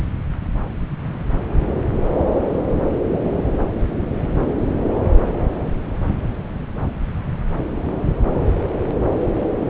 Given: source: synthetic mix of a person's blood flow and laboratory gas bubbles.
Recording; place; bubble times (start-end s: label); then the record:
Doppler ultrasound of blood flow; subclavian vein
no bubbles
From the record:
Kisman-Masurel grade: 000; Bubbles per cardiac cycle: 0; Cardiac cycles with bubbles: 0%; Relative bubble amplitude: no bubbles discernible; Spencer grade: 0 (complete lack of bubble signals)